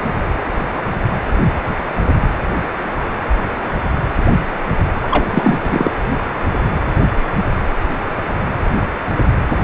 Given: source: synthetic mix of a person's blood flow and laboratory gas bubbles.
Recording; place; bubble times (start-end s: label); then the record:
Doppler ultrasound of blood flow; precordium
5.04-5.08 s: bubbles
5.11-5.25 s: bubbles
5.32-5.58 s: bubbles
5.63-5.90 s: bubbles
From the record:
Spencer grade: 1 (occasional bubble signal discernible with the cardiac motion signal, with majority of cardiac periods free of bubbles); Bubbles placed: anywhere in the cardiac cycle